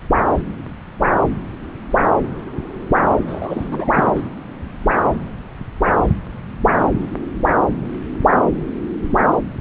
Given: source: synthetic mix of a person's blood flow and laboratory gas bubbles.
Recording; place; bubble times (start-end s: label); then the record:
Doppler ultrasound of blood flow; subclavian vein
3.27-3.92 s: bubbles
3.95-4.22 s: bubbles
From the record:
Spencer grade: 1 (occasional bubble signal discernible with the cardiac motion signal, with majority of cardiac periods free of bubbles); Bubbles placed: anywhere in the cardiac cycle